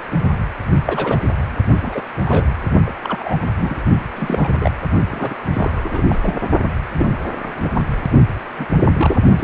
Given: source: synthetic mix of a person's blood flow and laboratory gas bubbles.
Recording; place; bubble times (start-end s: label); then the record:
Doppler ultrasound of blood flow; precordium
0.86-1.18 s: bubbles
1.82-2.02 s: bubbles
2.25-2.46 s: bubbles
2.86-2.92 s: bubbles
3.04-3.41 s: bubbles
3.60-3.81 s: bubbles
4.16-4.50 s: bubbles
4.61-4.71 s: bubbles
5.11-5.35 s: bubbles
5.53-6.19 s: bubbles
6.23-6.37 s: bubbles
6.95-7.09 s: bubbles
7.42-7.69 s: bubbles
7.75-7.81 s: bubbles
8.58-8.66 s: bubbles
8.97-9.17 s: bubbles
9.37-9.44 s: bubbles
From the record:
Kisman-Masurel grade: 242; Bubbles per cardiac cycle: several, 3 to 8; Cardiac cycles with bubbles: 100%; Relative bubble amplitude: moderate (0.250 to 0.450); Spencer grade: 3 (all of the cardiac periods contain showers or single bubble signals, but not dominating or overriding the cardiac motion signals); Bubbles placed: only in the low amplitude regions of the cardiac cycle